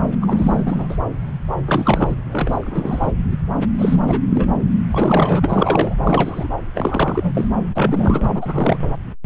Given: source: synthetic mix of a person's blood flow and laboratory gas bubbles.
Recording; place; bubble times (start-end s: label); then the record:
Doppler ultrasound of blood flow; subclavian vein
0.21-0.97 s: bubbles
1.67-2.15 s: bubbles
2.31-3.12 s: bubbles
3.78-4.21 s: bubbles
4.27-4.46 s: bubbles
4.90-5.95 s: bubbles
6.03-6.47 s: bubbles
6.74-7.46 s: bubbles
7.75-8.25 s: bubbles
8.28-8.78 s: bubbles
From the record:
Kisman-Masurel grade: 333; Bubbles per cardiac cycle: rolling drumbeat, 9 or more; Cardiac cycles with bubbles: 50 to 99%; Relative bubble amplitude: loud (0.450 to 0.775); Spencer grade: 3 (all of the cardiac periods contain showers or single bubble signals, but not dominating or overriding the cardiac motion signals); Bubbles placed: anywhere in the cardiac cycle